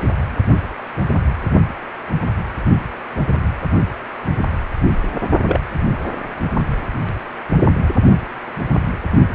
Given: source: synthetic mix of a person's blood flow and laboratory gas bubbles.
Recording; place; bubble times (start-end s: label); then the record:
Doppler ultrasound of blood flow; precordium
5.44-5.59 s: bubbles
From the record:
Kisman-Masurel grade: 112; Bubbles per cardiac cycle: 1 to 2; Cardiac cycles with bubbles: 1 to 10%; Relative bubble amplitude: moderate (0.250 to 0.450); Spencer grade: 1 (occasional bubble signal discernible with the cardiac motion signal, with majority of cardiac periods free of bubbles); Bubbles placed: only in the low amplitude regions of the cardiac cycle